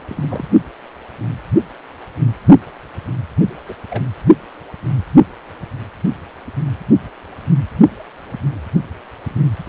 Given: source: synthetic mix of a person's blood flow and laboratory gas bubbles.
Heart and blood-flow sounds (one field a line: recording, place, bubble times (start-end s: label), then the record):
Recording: Doppler ultrasound of blood flow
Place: precordium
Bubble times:
0.08-0.47 s: bubbles
3.67-3.76 s: bubbles
3.90-4.06 s: bubbles
From the record:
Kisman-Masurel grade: 121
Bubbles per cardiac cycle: 1 to 2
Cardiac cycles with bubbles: 10 to 50%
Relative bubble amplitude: barely perceptible (0.100 to 0.250)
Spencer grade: 2 (many but less than half of the cardiac periods contain bubble signals, singularly or in groups)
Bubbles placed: only in the low amplitude regions of the cardiac cycle